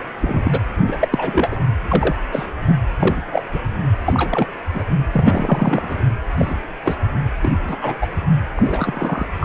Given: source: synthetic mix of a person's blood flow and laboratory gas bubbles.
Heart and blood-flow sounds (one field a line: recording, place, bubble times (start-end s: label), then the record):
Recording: Doppler ultrasound of blood flow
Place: precordium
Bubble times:
0.21-0.59 s: bubbles
0.87-0.97 s: bubbles
1.00-1.56 s: bubbles
1.88-2.15 s: bubbles
2.31-2.46 s: bubbles
2.66-2.76 s: bubbles
2.99-3.43 s: bubbles
3.52-3.60 s: bubbles
4.05-4.47 s: bubbles
4.73-4.83 s: bubbles
5.12-6.06 s: bubbles
6.37-6.55 s: bubbles
6.85-6.96 s: bubbles
7.42-7.52 s: bubbles
7.68-7.76 s: bubbles
7.81-7.97 s: bubbles
8.01-8.06 s: bubbles
8.56-9.26 s: bubbles
9.40-9.45 s: bubbles
From the record:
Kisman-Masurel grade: 242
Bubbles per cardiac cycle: several, 3 to 8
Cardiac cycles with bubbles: 100%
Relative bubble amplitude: moderate (0.250 to 0.450)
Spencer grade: 3 (all of the cardiac periods contain showers or single bubble signals, but not dominating or overriding the cardiac motion signals)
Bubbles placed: anywhere in the cardiac cycle